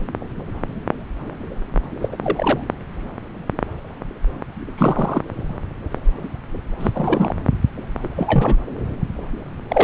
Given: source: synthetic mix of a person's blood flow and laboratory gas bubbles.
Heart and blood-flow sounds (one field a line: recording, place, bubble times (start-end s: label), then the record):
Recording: Doppler ultrasound of blood flow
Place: subclavian vein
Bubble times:
2.02-2.09 s: bubbles
2.12-2.16 s: bubbles
2.23-2.60 s: bubbles
4.78-5.21 s: bubbles
6.79-6.91 s: bubbles
6.95-7.35 s: bubbles
8.03-8.08 s: bubbles
8.16-8.55 s: bubbles
9.68-9.84 s: bubbles
From the record:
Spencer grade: 2 (many but less than half of the cardiac periods contain bubble signals, singularly or in groups)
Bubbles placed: anywhere in the cardiac cycle